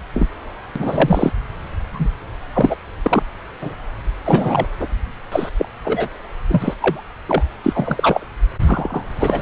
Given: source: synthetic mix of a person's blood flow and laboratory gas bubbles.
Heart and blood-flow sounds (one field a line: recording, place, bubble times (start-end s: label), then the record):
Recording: Doppler ultrasound of blood flow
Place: subclavian vein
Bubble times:
0.13-0.28 s: bubbles
0.76-1.31 s: bubbles
1.93-2.08 s: bubbles
2.54-2.76 s: bubbles
3.02-3.23 s: bubbles
3.61-3.75 s: bubbles
4.03-4.06 s: bubbles
4.23-4.67 s: bubbles
4.80-4.88 s: bubbles
5.31-5.49 s: bubbles
5.57-5.65 s: bubbles
5.84-6.08 s: bubbles
6.48-6.74 s: bubbles
6.79-7.02 s: bubbles
7.27-7.43 s: bubbles
7.63-8.25 s: bubbles
8.67-9.04 s: bubbles
9.20-9.42 s: bubbles
From the record:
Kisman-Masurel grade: 243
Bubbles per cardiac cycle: several, 3 to 8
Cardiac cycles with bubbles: 100%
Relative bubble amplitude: loud (0.450 to 0.775)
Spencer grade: 3 (all of the cardiac periods contain showers or single bubble signals, but not dominating or overriding the cardiac motion signals)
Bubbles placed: anywhere in the cardiac cycle